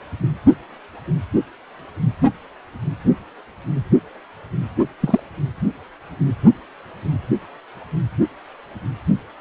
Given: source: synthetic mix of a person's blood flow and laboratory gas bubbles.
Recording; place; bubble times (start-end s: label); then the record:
Doppler ultrasound of blood flow; precordium
5.00-5.20 s: bubbles
From the record:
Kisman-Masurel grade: 113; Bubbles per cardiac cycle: 1 to 2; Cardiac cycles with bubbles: 1 to 10%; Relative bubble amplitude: loud (0.450 to 0.775); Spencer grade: 1 (occasional bubble signal discernible with the cardiac motion signal, with majority of cardiac periods free of bubbles); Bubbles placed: anywhere in the cardiac cycle